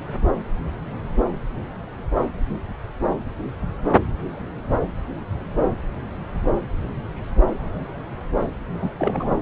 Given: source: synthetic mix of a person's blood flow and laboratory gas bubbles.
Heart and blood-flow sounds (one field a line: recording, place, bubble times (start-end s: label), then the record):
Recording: Doppler ultrasound of blood flow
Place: subclavian vein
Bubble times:
8.81-8.92 s: bubbles
8.98-9.38 s: bubbles
From the record:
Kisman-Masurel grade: 212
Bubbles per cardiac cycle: several, 3 to 8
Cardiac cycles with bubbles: 1 to 10%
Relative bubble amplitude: moderate (0.250 to 0.450)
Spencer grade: 1 (occasional bubble signal discernible with the cardiac motion signal, with majority of cardiac periods free of bubbles)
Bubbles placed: anywhere in the cardiac cycle